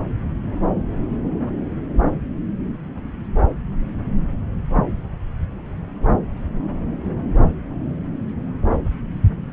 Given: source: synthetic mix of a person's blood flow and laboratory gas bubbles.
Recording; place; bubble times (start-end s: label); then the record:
Doppler ultrasound of blood flow; subclavian vein
no bubbles
From the record:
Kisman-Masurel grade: 000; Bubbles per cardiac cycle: 0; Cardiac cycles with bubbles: 0%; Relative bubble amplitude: no bubbles discernible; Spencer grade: 0 (complete lack of bubble signals)